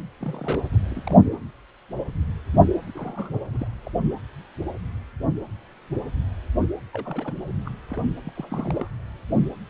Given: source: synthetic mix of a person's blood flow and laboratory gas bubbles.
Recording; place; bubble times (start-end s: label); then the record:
Doppler ultrasound of blood flow; precordium
0.20-0.67 s: bubbles
0.70-1.17 s: bubbles
2.94-3.40 s: bubbles
3.52-3.67 s: bubbles
3.85-3.91 s: bubbles
6.93-7.33 s: bubbles
7.66-7.69 s: bubbles
7.90-8.02 s: bubbles
8.25-8.31 s: bubbles
8.35-8.88 s: bubbles
From the record:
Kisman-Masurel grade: 221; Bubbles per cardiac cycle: several, 3 to 8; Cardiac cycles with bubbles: 10 to 50%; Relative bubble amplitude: barely perceptible (0.100 to 0.250); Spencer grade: 2 (many but less than half of the cardiac periods contain bubble signals, singularly or in groups); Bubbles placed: anywhere in the cardiac cycle